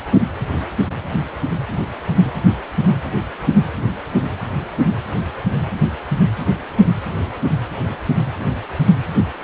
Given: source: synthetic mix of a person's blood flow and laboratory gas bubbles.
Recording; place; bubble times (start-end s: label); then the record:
Doppler ultrasound of blood flow; precordium
no bubbles
From the record:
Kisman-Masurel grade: 000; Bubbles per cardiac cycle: 0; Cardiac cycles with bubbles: 0%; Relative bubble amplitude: no bubbles discernible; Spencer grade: 0 (complete lack of bubble signals)